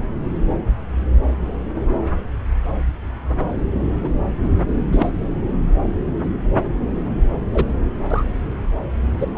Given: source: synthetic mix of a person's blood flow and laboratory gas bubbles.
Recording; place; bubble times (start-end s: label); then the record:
Doppler ultrasound of blood flow; subclavian vein
4.04-4.09 s: bubbles
4.92-5.11 s: bubbles
7.54-7.64 s: bubbles
8.11-8.24 s: bubbles
9.19-9.26 s: bubbles
9.35-9.37 s: bubbles
From the record:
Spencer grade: 2 (many but less than half of the cardiac periods contain bubble signals, singularly or in groups); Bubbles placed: anywhere in the cardiac cycle